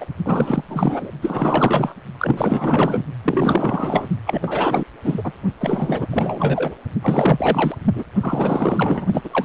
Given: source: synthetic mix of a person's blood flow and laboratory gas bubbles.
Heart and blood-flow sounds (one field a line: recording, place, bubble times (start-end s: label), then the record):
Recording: Doppler ultrasound of blood flow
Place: precordium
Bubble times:
0.00-0.06 s: bubbles
0.24-0.64 s: bubbles
0.67-1.11 s: bubbles
1.22-1.94 s: bubbles
2.17-3.04 s: bubbles
3.23-4.09 s: bubbles
4.26-4.84 s: bubbles
5.04-5.32 s: bubbles
5.60-6.07 s: bubbles
6.10-6.75 s: bubbles
7.01-7.75 s: bubbles
7.95-8.04 s: bubbles
8.21-9.06 s: bubbles
9.13-9.21 s: bubbles
9.24-9.45 s: bubbles
From the record:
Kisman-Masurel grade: 444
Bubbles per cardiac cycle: continuous sound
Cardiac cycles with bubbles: 100%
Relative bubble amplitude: maximal (0.775 to 0.999)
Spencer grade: 4 (maximum detectable bubble signal sounding continuously throughout systole and diastole of every cardiac period, and overriding the amplitude of the normal cardiac signals)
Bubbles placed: only in the low amplitude regions of the cardiac cycle